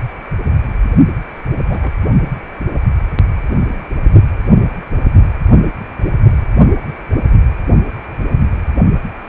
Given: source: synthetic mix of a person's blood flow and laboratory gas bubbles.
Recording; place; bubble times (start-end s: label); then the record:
Doppler ultrasound of blood flow; precordium
1.68-1.91 s: bubbles
From the record:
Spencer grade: 1 (occasional bubble signal discernible with the cardiac motion signal, with majority of cardiac periods free of bubbles); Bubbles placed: only in the low amplitude regions of the cardiac cycle